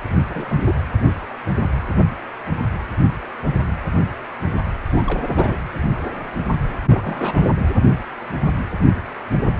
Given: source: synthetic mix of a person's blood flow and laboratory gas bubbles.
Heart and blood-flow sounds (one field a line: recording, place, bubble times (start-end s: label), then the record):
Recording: Doppler ultrasound of blood flow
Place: precordium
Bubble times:
0.03-0.19 s: bubbles
0.29-0.80 s: bubbles
4.88-5.62 s: bubbles
6.85-7.54 s: bubbles
From the record:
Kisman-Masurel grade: 221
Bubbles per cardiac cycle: several, 3 to 8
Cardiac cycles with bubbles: 10 to 50%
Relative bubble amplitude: barely perceptible (0.100 to 0.250)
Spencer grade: 2 (many but less than half of the cardiac periods contain bubble signals, singularly or in groups)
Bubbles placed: anywhere in the cardiac cycle